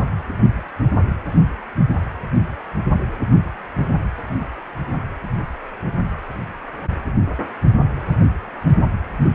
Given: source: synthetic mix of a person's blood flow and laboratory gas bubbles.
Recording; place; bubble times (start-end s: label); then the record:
Doppler ultrasound of blood flow; precordium
no bubbles
From the record:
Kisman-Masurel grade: 000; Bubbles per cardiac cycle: 0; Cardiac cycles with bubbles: 0%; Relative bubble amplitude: no bubbles discernible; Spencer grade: 0 (complete lack of bubble signals)